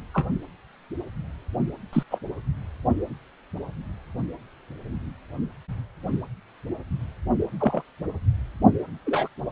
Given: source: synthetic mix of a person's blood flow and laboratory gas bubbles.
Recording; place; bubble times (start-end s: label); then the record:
Doppler ultrasound of blood flow; precordium
0.14-0.26 s: bubbles
1.93-2.03 s: bubbles
2.10-2.19 s: bubbles
7.60-7.82 s: bubbles
9.06-9.28 s: bubbles
From the record:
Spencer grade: 2 (many but less than half of the cardiac periods contain bubble signals, singularly or in groups); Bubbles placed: anywhere in the cardiac cycle